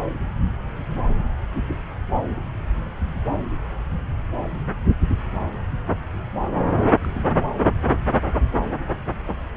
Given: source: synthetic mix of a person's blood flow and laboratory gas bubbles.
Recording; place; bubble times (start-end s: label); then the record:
Doppler ultrasound of blood flow; subclavian vein
6.97-7.21 s: bubbles
7.87-7.93 s: bubbles
From the record:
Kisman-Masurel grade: 211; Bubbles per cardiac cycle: several, 3 to 8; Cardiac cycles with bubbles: 1 to 10%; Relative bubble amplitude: barely perceptible (0.100 to 0.250); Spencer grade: 1 (occasional bubble signal discernible with the cardiac motion signal, with majority of cardiac periods free of bubbles); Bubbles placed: anywhere in the cardiac cycle